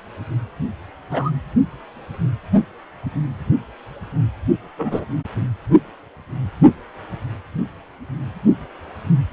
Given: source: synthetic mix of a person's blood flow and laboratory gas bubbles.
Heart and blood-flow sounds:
Doppler ultrasound of blood flow; precordium
1.11-1.31 s: bubbles
4.77-5.05 s: bubbles
From the record:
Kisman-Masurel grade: 123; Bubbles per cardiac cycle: 1 to 2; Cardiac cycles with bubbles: 10 to 50%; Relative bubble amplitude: loud (0.450 to 0.775); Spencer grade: 2 (many but less than half of the cardiac periods contain bubble signals, singularly or in groups); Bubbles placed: only in the low amplitude regions of the cardiac cycle

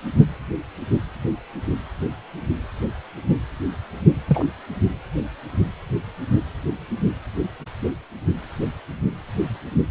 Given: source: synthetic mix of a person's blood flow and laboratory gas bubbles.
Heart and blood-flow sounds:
Doppler ultrasound of blood flow; precordium
4.28-4.46 s: bubbles
From the record:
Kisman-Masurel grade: 113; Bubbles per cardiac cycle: 1 to 2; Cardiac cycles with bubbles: 1 to 10%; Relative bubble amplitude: loud (0.450 to 0.775); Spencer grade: 1 (occasional bubble signal discernible with the cardiac motion signal, with majority of cardiac periods free of bubbles); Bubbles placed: anywhere in the cardiac cycle

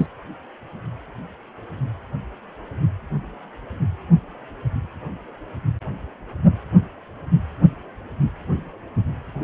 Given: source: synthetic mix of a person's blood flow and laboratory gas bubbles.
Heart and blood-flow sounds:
Doppler ultrasound of blood flow; precordium
0.00-0.06 s: bubbles
From the record:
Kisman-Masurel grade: 212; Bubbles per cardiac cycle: several, 3 to 8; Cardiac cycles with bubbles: 1 to 10%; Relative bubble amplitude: moderate (0.250 to 0.450); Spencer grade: 1 (occasional bubble signal discernible with the cardiac motion signal, with majority of cardiac periods free of bubbles); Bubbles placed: anywhere in the cardiac cycle

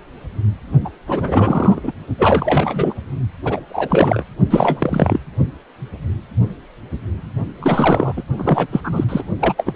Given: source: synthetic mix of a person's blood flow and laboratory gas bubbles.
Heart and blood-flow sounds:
Doppler ultrasound of blood flow; precordium
0.84-0.89 s: bubbles
1.06-1.80 s: bubbles
1.83-1.92 s: bubbles
2.19-2.94 s: bubbles
3.45-3.60 s: bubbles
3.69-4.24 s: bubbles
4.50-5.20 s: bubbles
7.59-8.12 s: bubbles
8.16-8.23 s: bubbles
8.38-8.67 s: bubbles
8.71-8.81 s: bubbles
8.83-9.05 s: bubbles
9.08-9.23 s: bubbles
9.40-9.76 s: bubbles
From the record:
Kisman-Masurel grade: 333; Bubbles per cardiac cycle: rolling drumbeat, 9 or more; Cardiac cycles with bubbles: 50 to 99%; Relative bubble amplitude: loud (0.450 to 0.775); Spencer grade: 3 (all of the cardiac periods contain showers or single bubble signals, but not dominating or overriding the cardiac motion signals); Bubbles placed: only in the low amplitude regions of the cardiac cycle

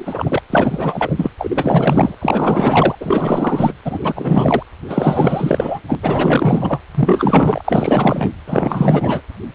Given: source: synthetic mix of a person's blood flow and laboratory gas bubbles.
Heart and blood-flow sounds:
Doppler ultrasound of blood flow; precordium
0.00-0.41 s: bubbles
0.50-1.31 s: bubbles
1.38-2.15 s: bubbles
2.21-2.95 s: bubbles
3.00-3.74 s: bubbles
3.85-4.63 s: bubbles
4.87-5.79 s: bubbles
5.88-5.95 s: bubbles
6.02-6.81 s: bubbles
6.95-7.62 s: bubbles
7.65-8.30 s: bubbles
8.46-9.21 s: bubbles
From the record:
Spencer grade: 4 (maximum detectable bubble signal sounding continuously throughout systole and diastole of every cardiac period, and overriding the amplitude of the normal cardiac signals); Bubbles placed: anywhere in the cardiac cycle

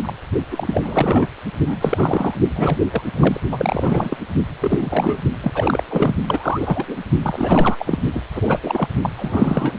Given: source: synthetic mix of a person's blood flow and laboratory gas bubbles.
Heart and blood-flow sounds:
Doppler ultrasound of blood flow; precordium
0.00-0.13 s: bubbles
0.50-1.27 s: bubbles
1.58-1.76 s: bubbles
1.80-2.35 s: bubbles
2.55-2.77 s: bubbles
2.80-2.86 s: bubbles
2.91-3.02 s: bubbles
3.16-3.41 s: bubbles
3.51-4.17 s: bubbles
4.61-5.18 s: bubbles
5.42-5.52 s: bubbles
5.54-5.83 s: bubbles
5.88-6.14 s: bubbles
6.26-6.96 s: bubbles
7.22-7.99 s: bubbles
8.13-8.24 s: bubbles
8.34-8.60 s: bubbles
8.62-8.88 s: bubbles
9.02-9.09 s: bubbles
9.17-9.74 s: bubbles
From the record:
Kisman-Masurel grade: 342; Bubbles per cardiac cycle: rolling drumbeat, 9 or more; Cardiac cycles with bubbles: 100%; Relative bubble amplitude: moderate (0.250 to 0.450); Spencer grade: 3 (all of the cardiac periods contain showers or single bubble signals, but not dominating or overriding the cardiac motion signals); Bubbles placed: only in the low amplitude regions of the cardiac cycle

